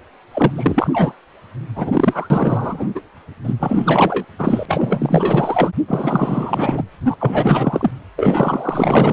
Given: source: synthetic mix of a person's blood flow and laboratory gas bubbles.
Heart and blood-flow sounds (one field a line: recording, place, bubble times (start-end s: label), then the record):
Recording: Doppler ultrasound of blood flow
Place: precordium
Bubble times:
0.31-1.14 s: bubbles
1.75-3.01 s: bubbles
3.44-3.54 s: bubbles
3.59-4.25 s: bubbles
4.38-4.65 s: bubbles
4.68-5.70 s: bubbles
5.88-6.84 s: bubbles
7.05-7.17 s: bubbles
7.19-7.91 s: bubbles
8.16-9.12 s: bubbles
From the record:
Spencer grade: 4 (maximum detectable bubble signal sounding continuously throughout systole and diastole of every cardiac period, and overriding the amplitude of the normal cardiac signals)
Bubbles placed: anywhere in the cardiac cycle